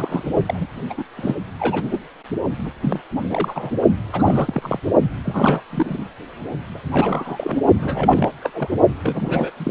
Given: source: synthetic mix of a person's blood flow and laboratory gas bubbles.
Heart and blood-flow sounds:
Doppler ultrasound of blood flow; precordium
0.00-0.23 s: bubbles
0.46-0.67 s: bubbles
0.90-0.94 s: bubbles
0.97-1.04 s: bubbles
1.17-1.34 s: bubbles
1.59-1.84 s: bubbles
1.91-1.99 s: bubbles
2.65-2.71 s: bubbles
2.82-3.00 s: bubbles
3.27-3.71 s: bubbles
4.12-4.79 s: bubbles
5.23-5.62 s: bubbles
5.70-6.08 s: bubbles
6.75-6.79 s: bubbles
6.92-7.60 s: bubbles
7.78-8.30 s: bubbles
8.40-8.51 s: bubbles
8.53-8.69 s: bubbles
9.04-9.51 s: bubbles
9.56-9.71 s: bubbles
From the record:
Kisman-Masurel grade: 342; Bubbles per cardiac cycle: rolling drumbeat, 9 or more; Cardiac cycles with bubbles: 100%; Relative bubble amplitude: moderate (0.250 to 0.450); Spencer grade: 3 (all of the cardiac periods contain showers or single bubble signals, but not dominating or overriding the cardiac motion signals); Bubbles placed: only in the low amplitude regions of the cardiac cycle

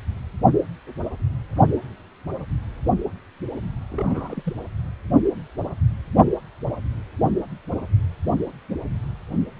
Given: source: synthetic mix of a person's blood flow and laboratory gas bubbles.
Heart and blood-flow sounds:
Doppler ultrasound of blood flow; precordium
3.90-4.54 s: bubbles
From the record:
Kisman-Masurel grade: 211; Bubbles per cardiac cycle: several, 3 to 8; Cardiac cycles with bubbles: 1 to 10%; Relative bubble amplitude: barely perceptible (0.100 to 0.250); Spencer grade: 1 (occasional bubble signal discernible with the cardiac motion signal, with majority of cardiac periods free of bubbles); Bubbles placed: anywhere in the cardiac cycle

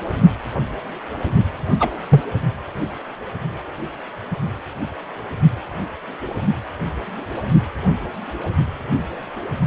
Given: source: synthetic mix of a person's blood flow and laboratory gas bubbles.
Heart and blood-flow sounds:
Doppler ultrasound of blood flow; precordium
1.80-1.91 s: bubbles
2.10-2.21 s: bubbles
From the record:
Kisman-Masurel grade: 113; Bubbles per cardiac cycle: 1 to 2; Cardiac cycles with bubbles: 1 to 10%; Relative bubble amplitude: loud (0.450 to 0.775); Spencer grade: 1 (occasional bubble signal discernible with the cardiac motion signal, with majority of cardiac periods free of bubbles); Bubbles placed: anywhere in the cardiac cycle

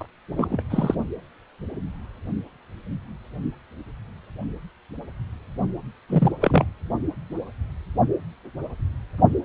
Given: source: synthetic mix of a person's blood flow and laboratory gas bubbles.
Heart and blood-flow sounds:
Doppler ultrasound of blood flow; precordium
0.00-0.06 s: bubbles
0.38-0.62 s: bubbles
0.70-0.95 s: bubbles
6.09-6.32 s: bubbles
6.41-6.65 s: bubbles
From the record:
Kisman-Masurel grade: 222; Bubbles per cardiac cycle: several, 3 to 8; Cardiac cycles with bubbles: 10 to 50%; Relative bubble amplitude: moderate (0.250 to 0.450); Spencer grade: 2 (many but less than half of the cardiac periods contain bubble signals, singularly or in groups); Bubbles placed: only in the low amplitude regions of the cardiac cycle

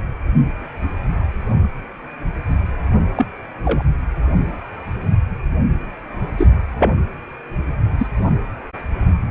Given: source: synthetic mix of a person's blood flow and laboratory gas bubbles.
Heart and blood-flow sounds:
Doppler ultrasound of blood flow; precordium
3.17-3.26 s: bubbles
3.65-3.83 s: bubbles
6.37-6.47 s: bubbles
6.79-6.98 s: bubbles
7.99-8.07 s: bubbles
From the record:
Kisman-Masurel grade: 122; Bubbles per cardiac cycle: 1 to 2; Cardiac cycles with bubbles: 10 to 50%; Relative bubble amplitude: moderate (0.250 to 0.450); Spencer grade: 2 (many but less than half of the cardiac periods contain bubble signals, singularly or in groups); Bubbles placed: anywhere in the cardiac cycle

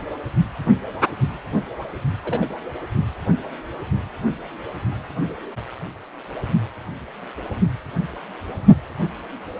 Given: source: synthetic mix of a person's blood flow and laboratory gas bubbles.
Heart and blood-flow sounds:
Doppler ultrasound of blood flow; precordium
2.24-2.46 s: bubbles
From the record:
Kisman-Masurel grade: 122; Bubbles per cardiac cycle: 1 to 2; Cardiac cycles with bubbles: 10 to 50%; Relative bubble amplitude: moderate (0.250 to 0.450); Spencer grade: 2 (many but less than half of the cardiac periods contain bubble signals, singularly or in groups); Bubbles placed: anywhere in the cardiac cycle

